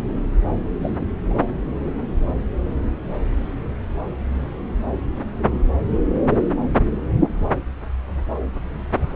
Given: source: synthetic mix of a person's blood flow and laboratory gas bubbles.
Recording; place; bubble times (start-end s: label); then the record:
Doppler ultrasound of blood flow; subclavian vein
0.82-0.97 s: bubbles
1.29-1.33 s: bubbles
From the record:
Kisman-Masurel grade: 111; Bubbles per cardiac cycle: 1 to 2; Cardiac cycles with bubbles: 1 to 10%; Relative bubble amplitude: barely perceptible (0.100 to 0.250); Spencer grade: 1 (occasional bubble signal discernible with the cardiac motion signal, with majority of cardiac periods free of bubbles); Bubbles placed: anywhere in the cardiac cycle